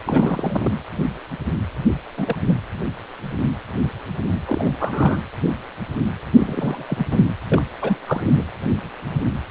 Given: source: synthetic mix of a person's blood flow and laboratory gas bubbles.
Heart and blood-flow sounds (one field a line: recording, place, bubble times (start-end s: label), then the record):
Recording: Doppler ultrasound of blood flow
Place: precordium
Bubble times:
0.04-0.72 s: bubbles
2.17-2.35 s: bubbles
2.48-2.54 s: bubbles
4.47-4.72 s: bubbles
4.79-5.20 s: bubbles
6.38-6.85 s: bubbles
6.88-7.22 s: bubbles
7.51-7.64 s: bubbles
7.81-7.97 s: bubbles
8.05-8.43 s: bubbles
From the record:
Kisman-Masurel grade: 232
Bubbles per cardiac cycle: several, 3 to 8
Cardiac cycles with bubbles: 50 to 99%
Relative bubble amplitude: moderate (0.250 to 0.450)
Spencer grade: 3 (all of the cardiac periods contain showers or single bubble signals, but not dominating or overriding the cardiac motion signals)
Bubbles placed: anywhere in the cardiac cycle